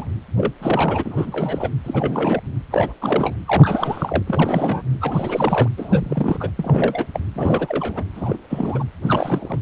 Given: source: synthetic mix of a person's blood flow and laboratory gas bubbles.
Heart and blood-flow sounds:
Doppler ultrasound of blood flow; precordium
0.00-0.08 s: bubbles
0.37-0.53 s: bubbles
0.59-1.70 s: bubbles
1.84-2.41 s: bubbles
2.71-2.93 s: bubbles
3.00-3.36 s: bubbles
3.46-4.23 s: bubbles
4.26-4.83 s: bubbles
5.00-5.68 s: bubbles
5.77-6.50 s: bubbles
6.57-7.06 s: bubbles
7.13-7.20 s: bubbles
7.34-8.04 s: bubbles
8.14-8.37 s: bubbles
8.50-8.85 s: bubbles
9.04-9.59 s: bubbles
From the record:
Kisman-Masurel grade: 342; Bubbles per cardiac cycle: rolling drumbeat, 9 or more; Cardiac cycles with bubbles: 100%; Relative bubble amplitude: moderate (0.250 to 0.450); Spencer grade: 3 (all of the cardiac periods contain showers or single bubble signals, but not dominating or overriding the cardiac motion signals); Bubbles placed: anywhere in the cardiac cycle

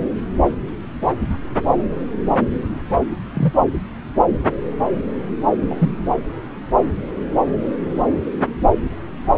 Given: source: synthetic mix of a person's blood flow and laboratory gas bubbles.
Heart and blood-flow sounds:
Doppler ultrasound of blood flow; subclavian vein
3.33-3.53 s: bubbles
5.67-5.92 s: bubbles
From the record:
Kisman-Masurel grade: 112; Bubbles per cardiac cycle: 1 to 2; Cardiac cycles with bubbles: 1 to 10%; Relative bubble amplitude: moderate (0.250 to 0.450); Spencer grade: 1 (occasional bubble signal discernible with the cardiac motion signal, with majority of cardiac periods free of bubbles); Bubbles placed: anywhere in the cardiac cycle

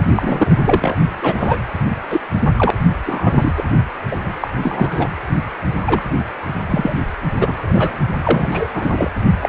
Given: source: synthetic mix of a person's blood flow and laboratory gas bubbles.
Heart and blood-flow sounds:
Doppler ultrasound of blood flow; precordium
0.00-0.02 s: bubbles
0.15-0.58 s: bubbles
0.64-0.96 s: bubbles
1.21-1.56 s: bubbles
2.09-2.21 s: bubbles
2.56-2.71 s: bubbles
3.05-3.52 s: bubbles
3.56-3.64 s: bubbles
4.11-4.17 s: bubbles
4.24-4.32 s: bubbles
4.41-4.48 s: bubbles
4.62-5.08 s: bubbles
5.82-6.14 s: bubbles
6.70-6.99 s: bubbles
7.35-8.00 s: bubbles
8.24-8.70 s: bubbles
8.73-9.11 s: bubbles
9.39-9.49 s: bubbles
From the record:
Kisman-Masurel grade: 243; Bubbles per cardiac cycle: several, 3 to 8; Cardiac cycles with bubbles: 100%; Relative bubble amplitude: loud (0.450 to 0.775); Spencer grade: 3 (all of the cardiac periods contain showers or single bubble signals, but not dominating or overriding the cardiac motion signals); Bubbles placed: anywhere in the cardiac cycle

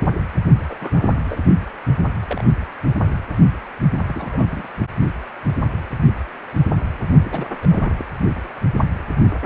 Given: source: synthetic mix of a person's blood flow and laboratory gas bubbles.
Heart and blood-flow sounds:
Doppler ultrasound of blood flow; precordium
0.69-0.76 s: bubbles
0.81-1.15 s: bubbles
1.25-1.40 s: bubbles
2.25-2.42 s: bubbles
3.97-4.46 s: bubbles
4.50-4.68 s: bubbles
4.79-4.85 s: bubbles
7.24-7.48 s: bubbles
7.62-7.93 s: bubbles
7.99-8.05 s: bubbles
From the record:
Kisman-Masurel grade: 221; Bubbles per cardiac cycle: several, 3 to 8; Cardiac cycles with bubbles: 10 to 50%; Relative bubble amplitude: barely perceptible (0.100 to 0.250); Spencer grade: 2 (many but less than half of the cardiac periods contain bubble signals, singularly or in groups); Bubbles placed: only in the low amplitude regions of the cardiac cycle

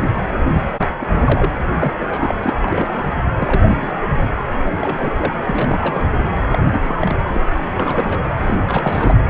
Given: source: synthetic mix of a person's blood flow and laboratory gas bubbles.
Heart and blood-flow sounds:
Doppler ultrasound of blood flow; precordium
0.00-0.24 s: bubbles
0.51-0.63 s: bubbles
0.79-0.86 s: bubbles
1.01-1.06 s: bubbles
1.25-1.52 s: bubbles
1.78-1.93 s: bubbles
2.00-2.35 s: bubbles
2.42-3.07 s: bubbles
3.40-3.96 s: bubbles
4.01-4.08 s: bubbles
4.17-4.25 s: bubbles
4.77-5.12 s: bubbles
5.16-5.33 s: bubbles
5.49-6.08 s: bubbles
6.15-6.25 s: bubbles
6.50-6.58 s: bubbles
6.73-6.79 s: bubbles
6.84-6.96 s: bubbles
7.00-7.17 s: bubbles
7.28-7.43 s: bubbles
7.75-8.31 s: bubbles
8.40-8.57 s: bubbles
8.67-9.15 s: bubbles
From the record:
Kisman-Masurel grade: 242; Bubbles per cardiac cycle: several, 3 to 8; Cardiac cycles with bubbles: 100%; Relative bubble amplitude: moderate (0.250 to 0.450); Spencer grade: 3 (all of the cardiac periods contain showers or single bubble signals, but not dominating or overriding the cardiac motion signals); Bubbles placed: anywhere in the cardiac cycle

